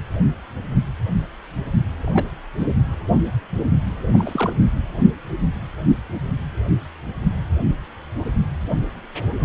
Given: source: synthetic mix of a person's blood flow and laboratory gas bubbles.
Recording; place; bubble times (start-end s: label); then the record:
Doppler ultrasound of blood flow; precordium
2.02-2.31 s: bubbles
2.58-2.67 s: bubbles
4.13-4.53 s: bubbles
From the record:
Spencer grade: 2 (many but less than half of the cardiac periods contain bubble signals, singularly or in groups); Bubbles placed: anywhere in the cardiac cycle